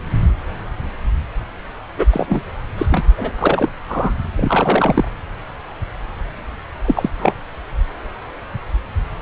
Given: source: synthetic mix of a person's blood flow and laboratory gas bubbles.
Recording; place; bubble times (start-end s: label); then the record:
Doppler ultrasound of blood flow; subclavian vein
1.96-2.05 s: bubbles
2.10-2.42 s: bubbles
2.77-2.86 s: bubbles
2.91-3.04 s: bubbles
3.17-3.31 s: bubbles
3.38-3.69 s: bubbles
3.88-4.12 s: bubbles
4.37-5.11 s: bubbles
6.85-7.10 s: bubbles
7.18-7.33 s: bubbles
From the record:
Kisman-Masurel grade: 223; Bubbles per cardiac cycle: several, 3 to 8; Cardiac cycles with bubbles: 10 to 50%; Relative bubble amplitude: loud (0.450 to 0.775); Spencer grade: 2 (many but less than half of the cardiac periods contain bubble signals, singularly or in groups); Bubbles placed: anywhere in the cardiac cycle